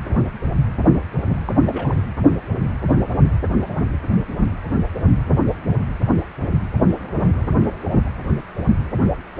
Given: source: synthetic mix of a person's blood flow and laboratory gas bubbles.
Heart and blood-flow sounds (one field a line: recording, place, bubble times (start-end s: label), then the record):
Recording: Doppler ultrasound of blood flow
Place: precordium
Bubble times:
1.45-1.52 s: bubbles
1.65-1.99 s: bubbles
From the record:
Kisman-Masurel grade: 211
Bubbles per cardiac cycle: several, 3 to 8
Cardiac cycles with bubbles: 1 to 10%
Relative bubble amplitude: barely perceptible (0.100 to 0.250)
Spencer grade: 1 (occasional bubble signal discernible with the cardiac motion signal, with majority of cardiac periods free of bubbles)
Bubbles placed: anywhere in the cardiac cycle